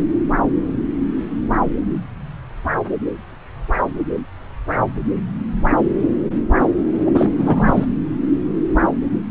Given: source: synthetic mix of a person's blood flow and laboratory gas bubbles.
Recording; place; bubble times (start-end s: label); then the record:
Doppler ultrasound of blood flow; subclavian vein
7.00-7.29 s: bubbles
7.38-7.86 s: bubbles
From the record:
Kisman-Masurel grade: 223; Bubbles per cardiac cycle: several, 3 to 8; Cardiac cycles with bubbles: 10 to 50%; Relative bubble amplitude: loud (0.450 to 0.775); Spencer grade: 2 (many but less than half of the cardiac periods contain bubble signals, singularly or in groups); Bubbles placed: anywhere in the cardiac cycle